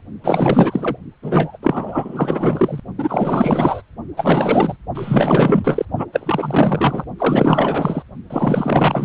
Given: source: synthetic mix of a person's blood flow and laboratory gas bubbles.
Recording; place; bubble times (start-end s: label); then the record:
Doppler ultrasound of blood flow; precordium
0.22-0.97 s: bubbles
1.22-1.57 s: bubbles
1.62-2.80 s: bubbles
2.98-3.82 s: bubbles
4.17-4.76 s: bubbles
4.94-5.85 s: bubbles
5.96-6.05 s: bubbles
6.12-7.04 s: bubbles
7.18-8.03 s: bubbles
8.30-9.05 s: bubbles
From the record:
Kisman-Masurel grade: 444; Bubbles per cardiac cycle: continuous sound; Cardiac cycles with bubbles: 100%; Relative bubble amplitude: maximal (0.775 to 0.999); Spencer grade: 4 (maximum detectable bubble signal sounding continuously throughout systole and diastole of every cardiac period, and overriding the amplitude of the normal cardiac signals); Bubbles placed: only in the low amplitude regions of the cardiac cycle